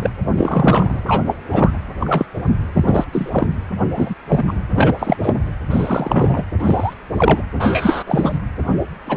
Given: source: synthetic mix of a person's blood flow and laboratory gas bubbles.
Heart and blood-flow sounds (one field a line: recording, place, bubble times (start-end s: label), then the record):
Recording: Doppler ultrasound of blood flow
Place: precordium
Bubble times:
0.00-0.10 s: bubbles
0.37-0.99 s: bubbles
1.07-1.35 s: bubbles
1.51-1.72 s: bubbles
2.00-2.25 s: bubbles
2.73-3.04 s: bubbles
3.12-3.50 s: bubbles
3.96-4.14 s: bubbles
4.28-4.43 s: bubbles
4.48-4.53 s: bubbles
4.75-4.95 s: bubbles
4.99-5.17 s: bubbles
5.22-5.34 s: bubbles
5.70-6.44 s: bubbles
6.59-6.94 s: bubbles
7.16-7.42 s: bubbles
7.59-8.03 s: bubbles
8.06-8.38 s: bubbles
9.06-9.17 s: bubbles
From the record:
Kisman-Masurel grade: 243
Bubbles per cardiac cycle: several, 3 to 8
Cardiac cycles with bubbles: 100%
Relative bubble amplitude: loud (0.450 to 0.775)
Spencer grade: 3 (all of the cardiac periods contain showers or single bubble signals, but not dominating or overriding the cardiac motion signals)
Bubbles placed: anywhere in the cardiac cycle